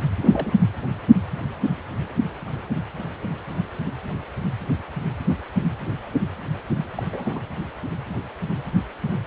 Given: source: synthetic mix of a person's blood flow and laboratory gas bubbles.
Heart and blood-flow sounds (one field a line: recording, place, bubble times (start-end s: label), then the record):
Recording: Doppler ultrasound of blood flow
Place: precordium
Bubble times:
0.21-0.54 s: bubbles
6.95-7.03 s: bubbles
7.12-7.41 s: bubbles
From the record:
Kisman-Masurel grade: 211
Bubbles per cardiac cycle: several, 3 to 8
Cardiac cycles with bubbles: 1 to 10%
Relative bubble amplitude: barely perceptible (0.100 to 0.250)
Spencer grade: 1 (occasional bubble signal discernible with the cardiac motion signal, with majority of cardiac periods free of bubbles)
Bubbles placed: anywhere in the cardiac cycle